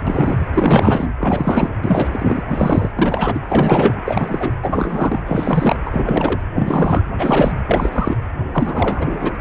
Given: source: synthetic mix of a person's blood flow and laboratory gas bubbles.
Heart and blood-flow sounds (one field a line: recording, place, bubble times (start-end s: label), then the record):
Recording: Doppler ultrasound of blood flow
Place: precordium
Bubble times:
0.07-0.47 s: bubbles
0.53-1.07 s: bubbles
1.19-1.69 s: bubbles
1.82-2.08 s: bubbles
2.12-2.41 s: bubbles
2.48-2.91 s: bubbles
2.96-3.40 s: bubbles
3.49-3.94 s: bubbles
4.05-4.51 s: bubbles
4.62-5.20 s: bubbles
5.26-5.78 s: bubbles
5.85-6.41 s: bubbles
6.54-7.02 s: bubbles
7.18-7.52 s: bubbles
7.66-8.16 s: bubbles
8.53-9.31 s: bubbles
From the record:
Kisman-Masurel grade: 343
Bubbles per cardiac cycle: rolling drumbeat, 9 or more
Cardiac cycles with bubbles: 100%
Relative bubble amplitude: loud (0.450 to 0.775)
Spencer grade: 3 (all of the cardiac periods contain showers or single bubble signals, but not dominating or overriding the cardiac motion signals)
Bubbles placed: anywhere in the cardiac cycle